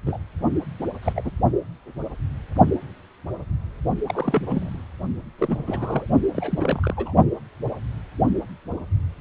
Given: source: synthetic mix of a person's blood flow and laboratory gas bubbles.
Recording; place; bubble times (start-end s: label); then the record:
Doppler ultrasound of blood flow; precordium
0.06-0.18 s: bubbles
0.79-0.87 s: bubbles
1.02-1.13 s: bubbles
1.16-1.31 s: bubbles
4.08-4.80 s: bubbles
5.38-6.07 s: bubbles
6.34-6.93 s: bubbles
6.97-7.13 s: bubbles
From the record:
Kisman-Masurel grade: 222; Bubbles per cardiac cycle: several, 3 to 8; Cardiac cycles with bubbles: 10 to 50%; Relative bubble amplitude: moderate (0.250 to 0.450); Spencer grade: 2 (many but less than half of the cardiac periods contain bubble signals, singularly or in groups); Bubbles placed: only in the low amplitude regions of the cardiac cycle